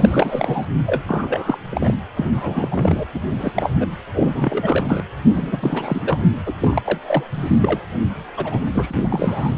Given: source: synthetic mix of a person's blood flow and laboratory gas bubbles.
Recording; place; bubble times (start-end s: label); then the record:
Doppler ultrasound of blood flow; precordium
0.00-0.66 s: bubbles
0.86-1.02 s: bubbles
1.07-1.58 s: bubbles
1.71-1.94 s: bubbles
2.17-3.04 s: bubbles
3.14-3.19 s: bubbles
3.31-3.52 s: bubbles
3.54-3.71 s: bubbles
3.75-3.87 s: bubbles
4.13-5.03 s: bubbles
5.34-6.19 s: bubbles
6.46-6.53 s: bubbles
6.61-6.82 s: bubbles
6.84-6.99 s: bubbles
7.06-7.24 s: bubbles
7.34-7.59 s: bubbles
7.62-7.80 s: bubbles
8.37-8.61 s: bubbles
8.72-9.55 s: bubbles
From the record:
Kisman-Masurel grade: 342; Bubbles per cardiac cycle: rolling drumbeat, 9 or more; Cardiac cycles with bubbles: 100%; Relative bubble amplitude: moderate (0.250 to 0.450); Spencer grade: 3 (all of the cardiac periods contain showers or single bubble signals, but not dominating or overriding the cardiac motion signals); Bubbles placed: anywhere in the cardiac cycle